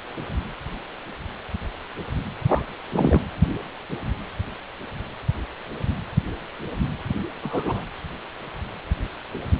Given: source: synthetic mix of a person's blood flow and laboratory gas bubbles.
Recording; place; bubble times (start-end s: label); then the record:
Doppler ultrasound of blood flow; precordium
2.48-2.63 s: bubbles
2.92-3.21 s: bubbles
7.43-7.81 s: bubbles
From the record:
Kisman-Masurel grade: 122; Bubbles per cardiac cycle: 1 to 2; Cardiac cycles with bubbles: 10 to 50%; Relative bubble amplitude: moderate (0.250 to 0.450); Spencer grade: 2 (many but less than half of the cardiac periods contain bubble signals, singularly or in groups); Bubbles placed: anywhere in the cardiac cycle